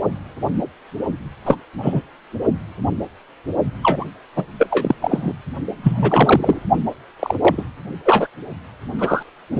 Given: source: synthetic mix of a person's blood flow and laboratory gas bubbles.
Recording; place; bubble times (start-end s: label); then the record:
Doppler ultrasound of blood flow; precordium
1.45-1.56 s: bubbles
1.82-2.02 s: bubbles
3.82-4.05 s: bubbles
4.35-4.44 s: bubbles
4.58-4.67 s: bubbles
4.70-4.95 s: bubbles
5.01-5.33 s: bubbles
5.83-6.59 s: bubbles
7.19-7.36 s: bubbles
7.41-7.64 s: bubbles
8.05-8.27 s: bubbles
8.99-9.22 s: bubbles
9.55-9.60 s: bubbles
From the record:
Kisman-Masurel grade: 223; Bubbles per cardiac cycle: several, 3 to 8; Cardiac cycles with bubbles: 10 to 50%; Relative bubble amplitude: loud (0.450 to 0.775); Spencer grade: 2 (many but less than half of the cardiac periods contain bubble signals, singularly or in groups); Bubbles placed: only in the low amplitude regions of the cardiac cycle